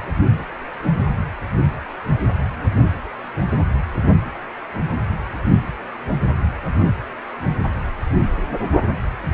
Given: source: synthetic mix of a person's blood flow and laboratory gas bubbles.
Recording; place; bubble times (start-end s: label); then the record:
Doppler ultrasound of blood flow; precordium
no bubbles
From the record:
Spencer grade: 0 (complete lack of bubble signals)